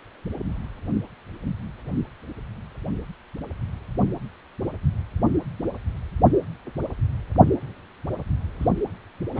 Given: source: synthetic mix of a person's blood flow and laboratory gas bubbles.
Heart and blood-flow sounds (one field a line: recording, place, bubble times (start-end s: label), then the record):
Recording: Doppler ultrasound of blood flow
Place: precordium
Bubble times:
8.59-8.70 s: bubbles
9.35-9.40 s: bubbles
From the record:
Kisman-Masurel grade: 121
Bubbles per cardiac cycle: 1 to 2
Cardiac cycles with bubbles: 10 to 50%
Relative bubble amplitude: barely perceptible (0.100 to 0.250)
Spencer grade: 2 (many but less than half of the cardiac periods contain bubble signals, singularly or in groups)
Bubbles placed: anywhere in the cardiac cycle